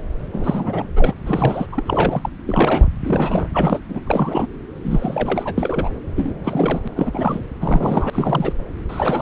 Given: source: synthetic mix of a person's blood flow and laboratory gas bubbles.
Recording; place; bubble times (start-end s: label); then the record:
Doppler ultrasound of blood flow; subclavian vein
0.32-0.89 s: bubbles
0.95-1.14 s: bubbles
1.25-1.67 s: bubbles
1.72-1.83 s: bubbles
1.87-2.30 s: bubbles
2.47-2.88 s: bubbles
3.04-3.48 s: bubbles
3.53-3.79 s: bubbles
3.88-4.00 s: bubbles
4.07-4.47 s: bubbles
4.75-5.55 s: bubbles
5.58-5.90 s: bubbles
6.16-6.34 s: bubbles
6.44-6.81 s: bubbles
6.84-6.88 s: bubbles
6.96-7.42 s: bubbles
7.59-8.10 s: bubbles
8.12-8.52 s: bubbles
8.88-9.22 s: bubbles
From the record:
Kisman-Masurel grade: 342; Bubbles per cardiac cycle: rolling drumbeat, 9 or more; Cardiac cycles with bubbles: 100%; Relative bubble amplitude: moderate (0.250 to 0.450); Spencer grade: 3 (all of the cardiac periods contain showers or single bubble signals, but not dominating or overriding the cardiac motion signals); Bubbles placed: anywhere in the cardiac cycle